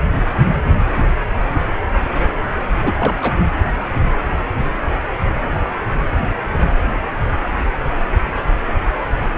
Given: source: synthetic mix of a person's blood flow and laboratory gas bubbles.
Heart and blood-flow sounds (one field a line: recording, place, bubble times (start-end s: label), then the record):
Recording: Doppler ultrasound of blood flow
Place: precordium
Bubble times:
2.82-2.93 s: bubbles
2.99-3.15 s: bubbles
3.21-3.34 s: bubbles
From the record:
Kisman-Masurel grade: 212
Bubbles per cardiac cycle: several, 3 to 8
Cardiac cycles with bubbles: 1 to 10%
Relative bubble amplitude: moderate (0.250 to 0.450)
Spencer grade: 1 (occasional bubble signal discernible with the cardiac motion signal, with majority of cardiac periods free of bubbles)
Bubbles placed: anywhere in the cardiac cycle